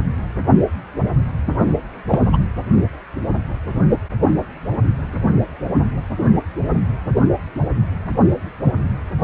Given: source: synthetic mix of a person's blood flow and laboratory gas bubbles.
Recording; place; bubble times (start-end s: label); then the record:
Doppler ultrasound of blood flow; precordium
2.08-2.20 s: bubbles
2.33-2.37 s: bubbles
From the record:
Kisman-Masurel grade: 113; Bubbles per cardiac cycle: 1 to 2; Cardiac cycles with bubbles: 1 to 10%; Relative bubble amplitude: loud (0.450 to 0.775); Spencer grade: 1 (occasional bubble signal discernible with the cardiac motion signal, with majority of cardiac periods free of bubbles); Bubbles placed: only in the low amplitude regions of the cardiac cycle